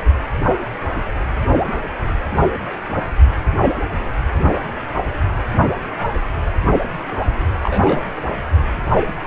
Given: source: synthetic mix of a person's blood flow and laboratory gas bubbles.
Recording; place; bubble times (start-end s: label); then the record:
Doppler ultrasound of blood flow; precordium
2.93-3.08 s: bubbles
7.63-8.06 s: bubbles
From the record:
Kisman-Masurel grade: 122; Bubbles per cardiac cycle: 1 to 2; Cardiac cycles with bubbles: 10 to 50%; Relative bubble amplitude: moderate (0.250 to 0.450); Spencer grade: 2 (many but less than half of the cardiac periods contain bubble signals, singularly or in groups); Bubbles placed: only in the low amplitude regions of the cardiac cycle